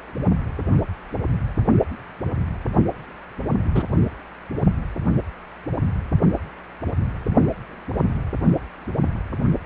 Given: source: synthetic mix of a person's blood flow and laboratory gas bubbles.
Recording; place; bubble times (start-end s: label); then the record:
Doppler ultrasound of blood flow; precordium
3.75-3.83 s: bubbles
From the record:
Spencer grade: 1 (occasional bubble signal discernible with the cardiac motion signal, with majority of cardiac periods free of bubbles); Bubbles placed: only in the low amplitude regions of the cardiac cycle